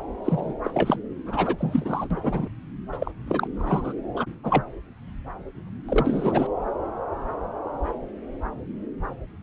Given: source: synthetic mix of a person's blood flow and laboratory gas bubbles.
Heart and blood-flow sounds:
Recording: Doppler ultrasound of blood flow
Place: subclavian vein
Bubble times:
0.24-0.54 s: bubbles
0.64-0.71 s: bubbles
0.74-1.00 s: bubbles
1.25-1.56 s: bubbles
1.58-2.08 s: bubbles
2.10-2.48 s: bubbles
2.92-2.98 s: bubbles
3.00-3.12 s: bubbles
3.27-3.48 s: bubbles
3.57-3.93 s: bubbles
4.16-4.25 s: bubbles
4.43-4.63 s: bubbles
5.88-6.47 s: bubbles
From the record:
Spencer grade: 2 (many but less than half of the cardiac periods contain bubble signals, singularly or in groups)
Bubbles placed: anywhere in the cardiac cycle

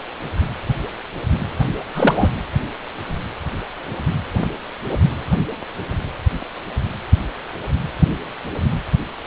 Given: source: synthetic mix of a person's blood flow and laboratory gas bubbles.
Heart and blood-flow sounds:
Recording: Doppler ultrasound of blood flow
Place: precordium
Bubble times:
1.95-2.29 s: bubbles
From the record:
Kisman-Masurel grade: 123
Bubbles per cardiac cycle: 1 to 2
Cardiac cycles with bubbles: 10 to 50%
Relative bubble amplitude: loud (0.450 to 0.775)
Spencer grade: 2 (many but less than half of the cardiac periods contain bubble signals, singularly or in groups)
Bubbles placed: anywhere in the cardiac cycle

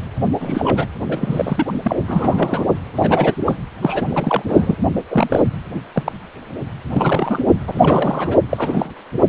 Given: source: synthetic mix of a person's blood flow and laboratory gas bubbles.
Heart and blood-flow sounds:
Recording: Doppler ultrasound of blood flow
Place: precordium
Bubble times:
0.40-0.86 s: bubbles
1.08-1.72 s: bubbles
1.82-1.97 s: bubbles
2.08-2.65 s: bubbles
2.95-3.34 s: bubbles
3.46-3.56 s: bubbles
3.82-4.42 s: bubbles
4.48-4.75 s: bubbles
5.10-5.42 s: bubbles
5.73-5.79 s: bubbles
5.94-6.03 s: bubbles
6.05-6.12 s: bubbles
6.92-7.39 s: bubbles
7.67-7.71 s: bubbles
7.75-8.38 s: bubbles
8.51-8.92 s: bubbles
From the record:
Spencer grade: 3 (all of the cardiac periods contain showers or single bubble signals, but not dominating or overriding the cardiac motion signals)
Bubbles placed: anywhere in the cardiac cycle

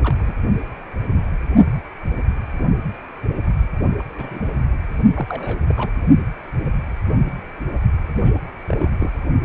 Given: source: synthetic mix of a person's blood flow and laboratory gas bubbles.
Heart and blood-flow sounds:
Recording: Doppler ultrasound of blood flow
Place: precordium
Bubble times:
0.01-0.16 s: bubbles
0.20-0.34 s: bubbles
3.98-4.03 s: bubbles
4.15-4.57 s: bubbles
5.13-5.58 s: bubbles
5.68-5.91 s: bubbles
8.24-8.32 s: bubbles
8.67-8.88 s: bubbles
9.00-9.11 s: bubbles
From the record:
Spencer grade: 2 (many but less than half of the cardiac periods contain bubble signals, singularly or in groups)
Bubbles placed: only in the low amplitude regions of the cardiac cycle

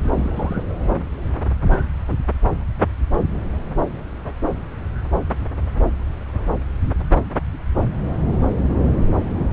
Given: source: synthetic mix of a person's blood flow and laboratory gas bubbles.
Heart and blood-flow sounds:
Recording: Doppler ultrasound of blood flow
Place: subclavian vein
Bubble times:
0.12-0.64 s: bubbles
From the record:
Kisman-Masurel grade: 111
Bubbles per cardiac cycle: 1 to 2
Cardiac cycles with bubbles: 1 to 10%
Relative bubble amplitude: barely perceptible (0.100 to 0.250)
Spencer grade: 1 (occasional bubble signal discernible with the cardiac motion signal, with majority of cardiac periods free of bubbles)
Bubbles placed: anywhere in the cardiac cycle

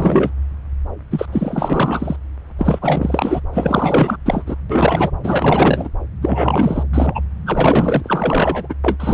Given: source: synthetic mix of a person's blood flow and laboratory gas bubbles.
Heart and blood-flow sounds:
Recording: Doppler ultrasound of blood flow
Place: subclavian vein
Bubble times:
0.00-0.30 s: bubbles
1.10-1.27 s: bubbles
1.32-2.16 s: bubbles
2.58-3.40 s: bubbles
3.53-4.17 s: bubbles
4.25-4.55 s: bubbles
4.69-5.11 s: bubbles
5.23-5.88 s: bubbles
6.21-6.83 s: bubbles
6.93-7.21 s: bubbles
7.46-8.75 s: bubbles
8.84-8.96 s: bubbles
9.00-9.14 s: bubbles
From the record:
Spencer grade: 4 (maximum detectable bubble signal sounding continuously throughout systole and diastole of every cardiac period, and overriding the amplitude of the normal cardiac signals)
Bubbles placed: anywhere in the cardiac cycle

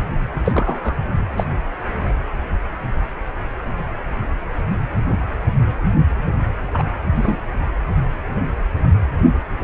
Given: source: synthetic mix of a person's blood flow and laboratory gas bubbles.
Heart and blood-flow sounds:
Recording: Doppler ultrasound of blood flow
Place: precordium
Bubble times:
0.45-0.98 s: bubbles
1.37-1.44 s: bubbles
6.72-6.83 s: bubbles
7.15-7.38 s: bubbles
From the record:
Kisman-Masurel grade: 123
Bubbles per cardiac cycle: 1 to 2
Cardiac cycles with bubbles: 10 to 50%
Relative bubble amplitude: loud (0.450 to 0.775)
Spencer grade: 2 (many but less than half of the cardiac periods contain bubble signals, singularly or in groups)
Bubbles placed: anywhere in the cardiac cycle

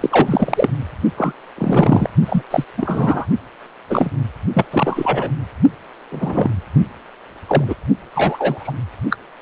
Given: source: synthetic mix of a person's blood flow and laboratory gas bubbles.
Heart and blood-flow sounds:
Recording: Doppler ultrasound of blood flow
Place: precordium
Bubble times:
0.01-0.70 s: bubbles
1.17-1.32 s: bubbles
1.57-2.09 s: bubbles
2.25-2.43 s: bubbles
2.50-2.65 s: bubbles
2.77-3.26 s: bubbles
3.89-4.11 s: bubbles
4.53-4.66 s: bubbles
4.71-5.31 s: bubbles
6.12-6.52 s: bubbles
7.47-7.75 s: bubbles
8.14-8.73 s: bubbles
9.10-9.16 s: bubbles
From the record:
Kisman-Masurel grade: 243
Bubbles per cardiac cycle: several, 3 to 8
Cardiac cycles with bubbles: 100%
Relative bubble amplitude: loud (0.450 to 0.775)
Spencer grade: 3 (all of the cardiac periods contain showers or single bubble signals, but not dominating or overriding the cardiac motion signals)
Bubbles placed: only in the low amplitude regions of the cardiac cycle

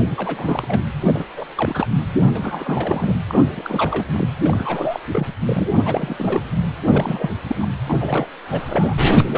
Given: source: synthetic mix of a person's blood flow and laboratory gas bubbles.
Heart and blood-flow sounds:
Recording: Doppler ultrasound of blood flow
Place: precordium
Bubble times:
0.01-0.83 s: bubbles
1.01-1.25 s: bubbles
1.37-1.46 s: bubbles
1.55-1.87 s: bubbles
2.25-2.29 s: bubbles
2.33-3.15 s: bubbles
3.29-3.42 s: bubbles
3.52-4.05 s: bubbles
4.12-4.27 s: bubbles
4.42-5.00 s: bubbles
5.12-5.27 s: bubbles
5.46-5.68 s: bubbles
5.85-6.42 s: bubbles
6.84-7.29 s: bubbles
7.47-7.56 s: bubbles
7.59-7.67 s: bubbles
7.88-7.97 s: bubbles
7.99-8.27 s: bubbles
8.47-9.11 s: bubbles
9.18-9.38 s: bubbles
From the record:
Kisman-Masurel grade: 342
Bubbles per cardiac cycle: rolling drumbeat, 9 or more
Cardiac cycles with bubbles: 100%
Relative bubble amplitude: moderate (0.250 to 0.450)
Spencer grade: 3 (all of the cardiac periods contain showers or single bubble signals, but not dominating or overriding the cardiac motion signals)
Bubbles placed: anywhere in the cardiac cycle

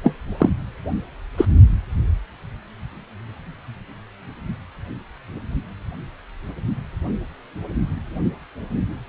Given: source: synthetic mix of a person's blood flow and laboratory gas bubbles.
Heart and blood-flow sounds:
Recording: Doppler ultrasound of blood flow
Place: precordium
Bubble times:
0.04-0.16 s: bubbles
0.38-0.50 s: bubbles
1.37-1.45 s: bubbles
From the record:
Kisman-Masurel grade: 213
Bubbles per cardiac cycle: several, 3 to 8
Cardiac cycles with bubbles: 1 to 10%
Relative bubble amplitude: loud (0.450 to 0.775)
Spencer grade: 1 (occasional bubble signal discernible with the cardiac motion signal, with majority of cardiac periods free of bubbles)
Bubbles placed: only in the low amplitude regions of the cardiac cycle

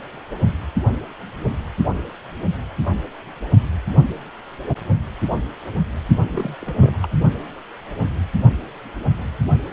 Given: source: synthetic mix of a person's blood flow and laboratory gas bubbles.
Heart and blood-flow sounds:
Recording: Doppler ultrasound of blood flow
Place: precordium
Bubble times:
6.32-6.54 s: bubbles
6.62-6.97 s: bubbles
7.03-7.08 s: bubbles
From the record:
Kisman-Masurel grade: 211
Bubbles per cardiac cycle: several, 3 to 8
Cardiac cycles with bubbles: 1 to 10%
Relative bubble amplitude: barely perceptible (0.100 to 0.250)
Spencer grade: 1 (occasional bubble signal discernible with the cardiac motion signal, with majority of cardiac periods free of bubbles)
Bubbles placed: only in the low amplitude regions of the cardiac cycle

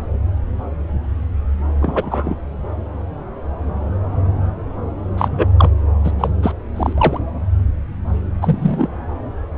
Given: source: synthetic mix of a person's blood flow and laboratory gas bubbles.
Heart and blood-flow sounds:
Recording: Doppler ultrasound of blood flow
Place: subclavian vein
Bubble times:
1.80-2.36 s: bubbles
5.18-5.46 s: bubbles
5.58-5.70 s: bubbles
6.04-6.12 s: bubbles
6.18-6.29 s: bubbles
6.43-6.53 s: bubbles
6.76-6.93 s: bubbles
6.98-7.20 s: bubbles
8.41-8.88 s: bubbles
From the record:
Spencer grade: 3 (all of the cardiac periods contain showers or single bubble signals, but not dominating or overriding the cardiac motion signals)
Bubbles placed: anywhere in the cardiac cycle

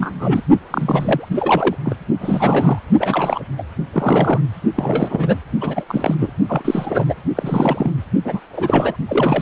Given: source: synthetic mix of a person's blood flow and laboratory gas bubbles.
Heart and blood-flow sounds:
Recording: Doppler ultrasound of blood flow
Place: precordium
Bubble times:
0.00-0.42 s: bubbles
0.71-1.29 s: bubbles
1.34-1.75 s: bubbles
1.83-1.96 s: bubbles
2.21-2.79 s: bubbles
3.00-3.43 s: bubbles
3.58-3.63 s: bubbles
3.92-4.42 s: bubbles
4.75-5.39 s: bubbles
5.61-5.85 s: bubbles
5.88-6.15 s: bubbles
6.20-6.33 s: bubbles
6.48-7.04 s: bubbles
7.07-7.15 s: bubbles
7.36-7.91 s: bubbles
8.25-8.40 s: bubbles
8.53-8.97 s: bubbles
9.07-9.42 s: bubbles
From the record:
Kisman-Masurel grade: 342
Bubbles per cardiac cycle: rolling drumbeat, 9 or more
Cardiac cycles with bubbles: 100%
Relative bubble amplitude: moderate (0.250 to 0.450)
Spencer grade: 3 (all of the cardiac periods contain showers or single bubble signals, but not dominating or overriding the cardiac motion signals)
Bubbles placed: only in the low amplitude regions of the cardiac cycle

